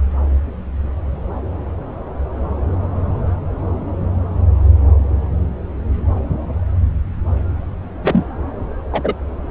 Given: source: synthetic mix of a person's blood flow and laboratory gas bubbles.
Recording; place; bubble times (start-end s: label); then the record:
Doppler ultrasound of blood flow; subclavian vein
8.03-8.27 s: bubbles
8.92-9.13 s: bubbles
From the record:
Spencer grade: 2 (many but less than half of the cardiac periods contain bubble signals, singularly or in groups); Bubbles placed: anywhere in the cardiac cycle